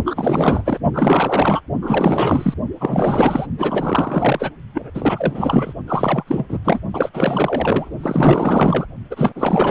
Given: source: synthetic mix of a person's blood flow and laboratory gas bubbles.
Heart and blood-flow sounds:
Doppler ultrasound of blood flow; precordium
0.05-0.78 s: bubbles
0.93-1.60 s: bubbles
1.82-2.54 s: bubbles
2.80-3.46 s: bubbles
3.58-4.51 s: bubbles
4.74-4.90 s: bubbles
4.94-5.73 s: bubbles
5.87-6.24 s: bubbles
6.27-6.58 s: bubbles
6.64-6.79 s: bubbles
6.92-7.09 s: bubbles
7.13-7.89 s: bubbles
8.00-8.87 s: bubbles
9.10-9.32 s: bubbles
9.35-9.71 s: bubbles
From the record:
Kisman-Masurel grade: 444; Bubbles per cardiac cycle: continuous sound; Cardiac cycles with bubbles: 100%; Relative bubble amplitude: maximal (0.775 to 0.999); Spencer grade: 4 (maximum detectable bubble signal sounding continuously throughout systole and diastole of every cardiac period, and overriding the amplitude of the normal cardiac signals); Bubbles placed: only in the low amplitude regions of the cardiac cycle

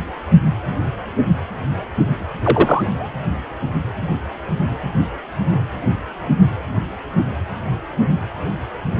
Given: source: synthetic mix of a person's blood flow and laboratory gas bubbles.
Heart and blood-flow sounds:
Doppler ultrasound of blood flow; precordium
2.42-3.08 s: bubbles
From the record:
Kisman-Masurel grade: 213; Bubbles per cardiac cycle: several, 3 to 8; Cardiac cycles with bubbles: 1 to 10%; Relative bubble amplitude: loud (0.450 to 0.775); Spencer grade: 1 (occasional bubble signal discernible with the cardiac motion signal, with majority of cardiac periods free of bubbles); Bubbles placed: anywhere in the cardiac cycle

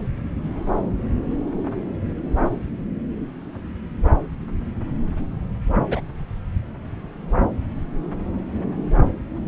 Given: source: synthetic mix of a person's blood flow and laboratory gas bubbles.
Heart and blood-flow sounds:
Doppler ultrasound of blood flow; subclavian vein
5.89-6.00 s: bubbles
From the record:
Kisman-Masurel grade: 112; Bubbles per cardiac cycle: 1 to 2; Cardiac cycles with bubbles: 1 to 10%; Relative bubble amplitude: moderate (0.250 to 0.450); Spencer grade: 1 (occasional bubble signal discernible with the cardiac motion signal, with majority of cardiac periods free of bubbles); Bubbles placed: anywhere in the cardiac cycle

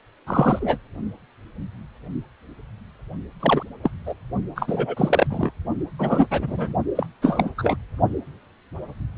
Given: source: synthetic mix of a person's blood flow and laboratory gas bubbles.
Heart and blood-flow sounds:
Doppler ultrasound of blood flow; precordium
0.26-0.79 s: bubbles
3.40-3.63 s: bubbles
3.83-3.91 s: bubbles
4.05-4.14 s: bubbles
4.55-5.26 s: bubbles
5.30-5.51 s: bubbles
5.99-6.26 s: bubbles
6.30-6.74 s: bubbles
6.95-7.06 s: bubbles
7.21-7.50 s: bubbles
7.58-7.77 s: bubbles
From the record:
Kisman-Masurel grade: 233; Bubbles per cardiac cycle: several, 3 to 8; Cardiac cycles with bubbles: 50 to 99%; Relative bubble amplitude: loud (0.450 to 0.775); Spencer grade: 3 (all of the cardiac periods contain showers or single bubble signals, but not dominating or overriding the cardiac motion signals); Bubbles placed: only in the low amplitude regions of the cardiac cycle

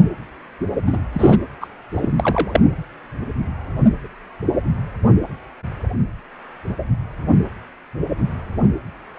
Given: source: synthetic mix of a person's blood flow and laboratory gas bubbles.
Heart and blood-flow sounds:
Doppler ultrasound of blood flow; precordium
0.86-0.98 s: bubbles
1.12-1.39 s: bubbles
1.60-1.67 s: bubbles
1.94-2.09 s: bubbles
2.19-2.60 s: bubbles
From the record:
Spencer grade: 2 (many but less than half of the cardiac periods contain bubble signals, singularly or in groups); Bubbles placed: anywhere in the cardiac cycle

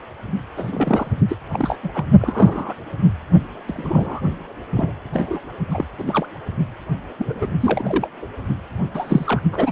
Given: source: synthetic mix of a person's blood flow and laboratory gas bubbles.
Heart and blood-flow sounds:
Doppler ultrasound of blood flow; precordium
0.56-1.15 s: bubbles
1.29-1.37 s: bubbles
1.52-1.77 s: bubbles
1.83-1.89 s: bubbles
1.94-2.04 s: bubbles
2.21-2.74 s: bubbles
3.67-4.21 s: bubbles
4.76-4.94 s: bubbles
5.12-5.40 s: bubbles
5.71-5.85 s: bubbles
5.98-6.04 s: bubbles
6.07-6.26 s: bubbles
7.18-7.47 s: bubbles
7.60-8.08 s: bubbles
8.22-8.27 s: bubbles
8.94-9.40 s: bubbles
9.51-9.71 s: bubbles
From the record:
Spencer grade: 3 (all of the cardiac periods contain showers or single bubble signals, but not dominating or overriding the cardiac motion signals); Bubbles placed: only in the low amplitude regions of the cardiac cycle

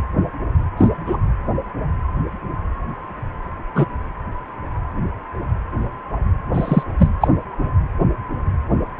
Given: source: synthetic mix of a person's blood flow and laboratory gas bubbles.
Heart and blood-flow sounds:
Doppler ultrasound of blood flow; precordium
0.77-0.89 s: bubbles
1.06-1.17 s: bubbles
3.75-3.85 s: bubbles
6.54-6.83 s: bubbles
6.98-7.10 s: bubbles
7.21-7.28 s: bubbles
From the record:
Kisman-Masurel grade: 123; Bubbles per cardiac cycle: 1 to 2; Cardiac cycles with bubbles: 10 to 50%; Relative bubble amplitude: loud (0.450 to 0.775); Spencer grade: 2 (many but less than half of the cardiac periods contain bubble signals, singularly or in groups); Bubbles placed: anywhere in the cardiac cycle

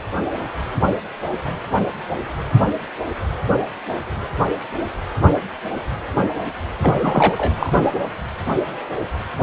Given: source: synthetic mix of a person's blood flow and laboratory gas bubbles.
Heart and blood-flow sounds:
Doppler ultrasound of blood flow; precordium
6.81-6.95 s: bubbles
7.02-7.90 s: bubbles
From the record:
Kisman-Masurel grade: 213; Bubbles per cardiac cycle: several, 3 to 8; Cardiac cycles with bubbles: 1 to 10%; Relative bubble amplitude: loud (0.450 to 0.775); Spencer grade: 1 (occasional bubble signal discernible with the cardiac motion signal, with majority of cardiac periods free of bubbles); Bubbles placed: anywhere in the cardiac cycle

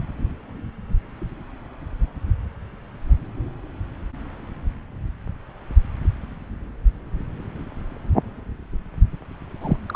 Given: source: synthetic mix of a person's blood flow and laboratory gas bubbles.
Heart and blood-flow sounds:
Doppler ultrasound of blood flow; subclavian vein
9.62-9.77 s: bubbles
9.89-9.96 s: bubbles
From the record:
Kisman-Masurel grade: 212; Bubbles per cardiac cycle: several, 3 to 8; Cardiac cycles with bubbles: 1 to 10%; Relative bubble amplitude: moderate (0.250 to 0.450); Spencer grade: 1 (occasional bubble signal discernible with the cardiac motion signal, with majority of cardiac periods free of bubbles); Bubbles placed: anywhere in the cardiac cycle

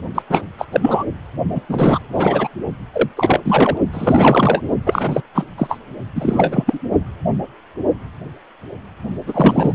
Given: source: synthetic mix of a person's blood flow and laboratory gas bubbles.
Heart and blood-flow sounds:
Doppler ultrasound of blood flow; precordium
0.15-0.22 s: bubbles
0.29-0.42 s: bubbles
0.58-0.66 s: bubbles
0.72-1.04 s: bubbles
1.54-1.62 s: bubbles
1.69-2.00 s: bubbles
2.12-2.48 s: bubbles
2.94-3.08 s: bubbles
3.16-3.41 s: bubbles
3.44-3.77 s: bubbles
3.92-4.62 s: bubbles
4.86-5.22 s: bubbles
5.35-5.46 s: bubbles
5.58-5.79 s: bubbles
6.15-6.79 s: bubbles
9.27-9.73 s: bubbles
From the record:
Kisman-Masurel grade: 333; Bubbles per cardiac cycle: rolling drumbeat, 9 or more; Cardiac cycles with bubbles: 50 to 99%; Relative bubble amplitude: loud (0.450 to 0.775); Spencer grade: 3 (all of the cardiac periods contain showers or single bubble signals, but not dominating or overriding the cardiac motion signals); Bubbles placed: only in the low amplitude regions of the cardiac cycle

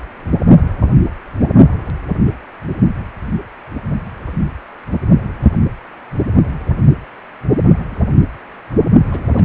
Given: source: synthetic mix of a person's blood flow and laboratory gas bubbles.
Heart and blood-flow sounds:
Doppler ultrasound of blood flow; precordium
9.05-9.31 s: bubbles
9.36-9.45 s: bubbles
From the record:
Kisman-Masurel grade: 211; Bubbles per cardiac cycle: several, 3 to 8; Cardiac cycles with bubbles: 1 to 10%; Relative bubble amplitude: barely perceptible (0.100 to 0.250); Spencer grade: 1 (occasional bubble signal discernible with the cardiac motion signal, with majority of cardiac periods free of bubbles); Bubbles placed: only in the low amplitude regions of the cardiac cycle

